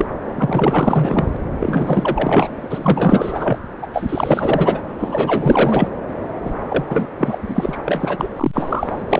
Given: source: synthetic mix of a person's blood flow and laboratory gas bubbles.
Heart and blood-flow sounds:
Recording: Doppler ultrasound of blood flow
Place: subclavian vein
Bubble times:
0.00-0.05 s: bubbles
0.27-1.37 s: bubbles
1.59-2.67 s: bubbles
2.70-3.58 s: bubbles
3.81-3.87 s: bubbles
3.93-4.81 s: bubbles
4.99-5.89 s: bubbles
6.44-6.53 s: bubbles
6.68-6.84 s: bubbles
6.88-7.07 s: bubbles
7.17-7.38 s: bubbles
7.41-7.77 s: bubbles
7.85-8.18 s: bubbles
8.20-8.28 s: bubbles
8.36-9.02 s: bubbles
9.09-9.20 s: bubbles
From the record:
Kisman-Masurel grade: 444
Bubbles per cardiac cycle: continuous sound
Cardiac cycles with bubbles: 100%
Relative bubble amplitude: maximal (0.775 to 0.999)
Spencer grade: 4 (maximum detectable bubble signal sounding continuously throughout systole and diastole of every cardiac period, and overriding the amplitude of the normal cardiac signals)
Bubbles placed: anywhere in the cardiac cycle

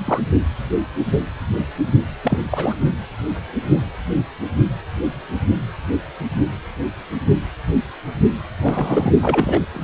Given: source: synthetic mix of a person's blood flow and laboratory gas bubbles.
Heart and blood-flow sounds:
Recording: Doppler ultrasound of blood flow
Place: precordium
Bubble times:
0.05-0.19 s: bubbles
2.23-2.76 s: bubbles
8.62-9.11 s: bubbles
9.21-9.65 s: bubbles
9.73-9.84 s: bubbles
From the record:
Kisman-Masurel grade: 222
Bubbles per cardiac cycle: several, 3 to 8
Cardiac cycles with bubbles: 10 to 50%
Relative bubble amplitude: moderate (0.250 to 0.450)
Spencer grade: 2 (many but less than half of the cardiac periods contain bubble signals, singularly or in groups)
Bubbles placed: only in the low amplitude regions of the cardiac cycle

